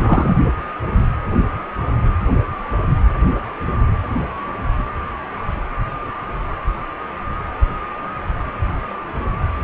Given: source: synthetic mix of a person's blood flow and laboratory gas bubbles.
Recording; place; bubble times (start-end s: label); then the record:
Doppler ultrasound of blood flow; precordium
0.00-0.35 s: bubbles
From the record:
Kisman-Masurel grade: 223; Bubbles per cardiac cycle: several, 3 to 8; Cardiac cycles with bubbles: 10 to 50%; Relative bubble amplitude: loud (0.450 to 0.775); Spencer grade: 2 (many but less than half of the cardiac periods contain bubble signals, singularly or in groups); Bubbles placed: only in the low amplitude regions of the cardiac cycle